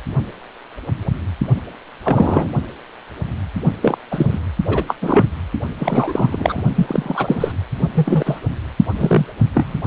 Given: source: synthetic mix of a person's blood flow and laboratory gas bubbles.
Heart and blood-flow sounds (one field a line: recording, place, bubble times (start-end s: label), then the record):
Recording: Doppler ultrasound of blood flow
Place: precordium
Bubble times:
2.04-2.48 s: bubbles
3.82-3.98 s: bubbles
4.11-4.38 s: bubbles
4.67-4.84 s: bubbles
4.88-4.96 s: bubbles
5.01-5.25 s: bubbles
5.78-6.63 s: bubbles
6.75-7.52 s: bubbles
7.95-8.39 s: bubbles
8.98-9.26 s: bubbles
9.54-9.81 s: bubbles
From the record:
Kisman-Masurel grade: 223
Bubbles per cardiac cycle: several, 3 to 8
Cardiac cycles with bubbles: 10 to 50%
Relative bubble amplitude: loud (0.450 to 0.775)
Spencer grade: 2 (many but less than half of the cardiac periods contain bubble signals, singularly or in groups)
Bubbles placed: only in the low amplitude regions of the cardiac cycle